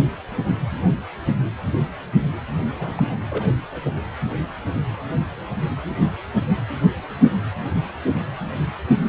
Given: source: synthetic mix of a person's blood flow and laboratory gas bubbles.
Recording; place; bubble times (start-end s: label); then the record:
Doppler ultrasound of blood flow; precordium
2.75-3.19 s: bubbles
3.29-3.49 s: bubbles
3.71-3.80 s: bubbles
3.83-3.92 s: bubbles
From the record:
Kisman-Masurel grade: 221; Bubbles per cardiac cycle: several, 3 to 8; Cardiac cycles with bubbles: 10 to 50%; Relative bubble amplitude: barely perceptible (0.100 to 0.250); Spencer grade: 2 (many but less than half of the cardiac periods contain bubble signals, singularly or in groups); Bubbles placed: anywhere in the cardiac cycle